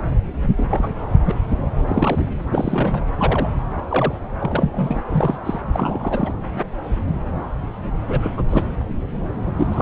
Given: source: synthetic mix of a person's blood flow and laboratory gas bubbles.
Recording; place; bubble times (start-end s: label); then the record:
Doppler ultrasound of blood flow; subclavian vein
0.57-0.68 s: bubbles
0.71-0.96 s: bubbles
1.24-1.35 s: bubbles
1.87-2.34 s: bubbles
2.50-3.01 s: bubbles
3.17-3.49 s: bubbles
3.90-4.15 s: bubbles
4.39-5.01 s: bubbles
5.08-5.38 s: bubbles
5.44-5.59 s: bubbles
5.72-6.33 s: bubbles
8.09-8.34 s: bubbles
8.37-8.43 s: bubbles
8.49-8.64 s: bubbles
9.58-9.81 s: bubbles
From the record:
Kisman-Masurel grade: 232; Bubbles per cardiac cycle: several, 3 to 8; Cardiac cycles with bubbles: 50 to 99%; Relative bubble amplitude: moderate (0.250 to 0.450); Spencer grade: 3 (all of the cardiac periods contain showers or single bubble signals, but not dominating or overriding the cardiac motion signals); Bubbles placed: anywhere in the cardiac cycle